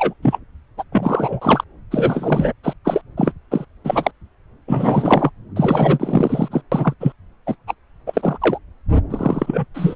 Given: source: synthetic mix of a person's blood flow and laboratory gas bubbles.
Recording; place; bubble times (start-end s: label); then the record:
Doppler ultrasound of blood flow; subclavian vein
0.00-0.14 s: bubbles
0.22-0.39 s: bubbles
0.77-0.83 s: bubbles
0.91-1.64 s: bubbles
1.91-2.53 s: bubbles
2.64-2.74 s: bubbles
2.85-3.02 s: bubbles
3.17-3.33 s: bubbles
3.51-3.65 s: bubbles
3.84-4.11 s: bubbles
4.67-5.30 s: bubbles
5.55-6.48 s: bubbles
6.51-6.61 s: bubbles
6.71-6.94 s: bubbles
7.00-7.12 s: bubbles
7.46-7.55 s: bubbles
7.67-7.74 s: bubbles
8.07-8.38 s: bubbles
8.41-8.59 s: bubbles
9.10-9.65 s: bubbles
9.74-9.95 s: bubbles
From the record:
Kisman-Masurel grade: 243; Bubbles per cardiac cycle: several, 3 to 8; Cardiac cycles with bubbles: 100%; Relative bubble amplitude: loud (0.450 to 0.775); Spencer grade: 3 (all of the cardiac periods contain showers or single bubble signals, but not dominating or overriding the cardiac motion signals); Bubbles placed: anywhere in the cardiac cycle